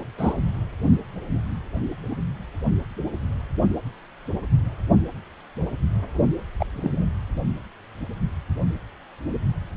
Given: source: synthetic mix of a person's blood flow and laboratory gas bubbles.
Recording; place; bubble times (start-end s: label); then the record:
Doppler ultrasound of blood flow; precordium
0.18-0.34 s: bubbles
6.59-6.65 s: bubbles
6.73-7.05 s: bubbles
From the record:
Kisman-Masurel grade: 122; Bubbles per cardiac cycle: 1 to 2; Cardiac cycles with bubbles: 10 to 50%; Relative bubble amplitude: moderate (0.250 to 0.450); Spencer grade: 2 (many but less than half of the cardiac periods contain bubble signals, singularly or in groups); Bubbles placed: only in the low amplitude regions of the cardiac cycle